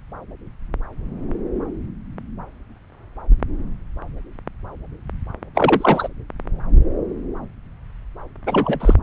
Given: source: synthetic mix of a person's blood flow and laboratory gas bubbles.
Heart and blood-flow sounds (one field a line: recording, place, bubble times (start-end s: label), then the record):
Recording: Doppler ultrasound of blood flow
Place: subclavian vein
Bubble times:
5.54-6.08 s: bubbles
8.46-8.94 s: bubbles
From the record:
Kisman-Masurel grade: 213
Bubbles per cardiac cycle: several, 3 to 8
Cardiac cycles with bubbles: 1 to 10%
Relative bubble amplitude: loud (0.450 to 0.775)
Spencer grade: 1 (occasional bubble signal discernible with the cardiac motion signal, with majority of cardiac periods free of bubbles)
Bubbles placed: anywhere in the cardiac cycle